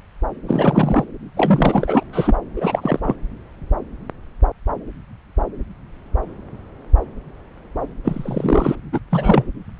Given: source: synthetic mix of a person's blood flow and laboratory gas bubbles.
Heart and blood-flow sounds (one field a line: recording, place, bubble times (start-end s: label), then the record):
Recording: Doppler ultrasound of blood flow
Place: subclavian vein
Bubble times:
0.46-1.05 s: bubbles
1.36-2.03 s: bubbles
2.12-2.35 s: bubbles
2.56-3.00 s: bubbles
3.03-3.16 s: bubbles
8.04-8.75 s: bubbles
8.92-8.99 s: bubbles
9.11-9.45 s: bubbles
From the record:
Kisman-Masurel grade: 222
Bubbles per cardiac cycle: several, 3 to 8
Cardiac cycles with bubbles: 10 to 50%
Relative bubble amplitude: moderate (0.250 to 0.450)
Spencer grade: 2 (many but less than half of the cardiac periods contain bubble signals, singularly or in groups)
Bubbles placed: anywhere in the cardiac cycle